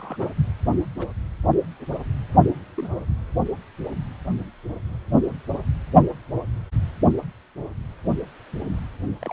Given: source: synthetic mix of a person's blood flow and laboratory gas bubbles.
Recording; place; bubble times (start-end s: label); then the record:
Doppler ultrasound of blood flow; precordium
0.00-0.16 s: bubbles
0.19-0.26 s: bubbles
0.99-1.08 s: bubbles
2.77-2.89 s: bubbles
3.85-3.89 s: bubbles
9.19-9.33 s: bubbles
From the record:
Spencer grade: 2 (many but less than half of the cardiac periods contain bubble signals, singularly or in groups); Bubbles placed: only in the low amplitude regions of the cardiac cycle